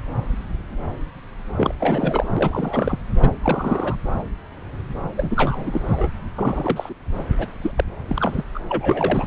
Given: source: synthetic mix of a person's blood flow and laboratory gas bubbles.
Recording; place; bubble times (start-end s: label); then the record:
Doppler ultrasound of blood flow; subclavian vein
1.56-1.75 s: bubbles
1.80-2.24 s: bubbles
2.36-2.98 s: bubbles
3.20-3.28 s: bubbles
3.42-3.96 s: bubbles
5.17-6.08 s: bubbles
6.35-6.93 s: bubbles
7.18-7.24 s: bubbles
7.38-7.47 s: bubbles
7.62-7.71 s: bubbles
7.77-7.84 s: bubbles
8.07-8.44 s: bubbles
8.54-8.60 s: bubbles
8.69-9.27 s: bubbles
From the record:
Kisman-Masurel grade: 332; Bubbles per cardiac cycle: rolling drumbeat, 9 or more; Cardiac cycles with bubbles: 50 to 99%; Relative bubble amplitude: moderate (0.250 to 0.450); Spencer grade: 3 (all of the cardiac periods contain showers or single bubble signals, but not dominating or overriding the cardiac motion signals); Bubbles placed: anywhere in the cardiac cycle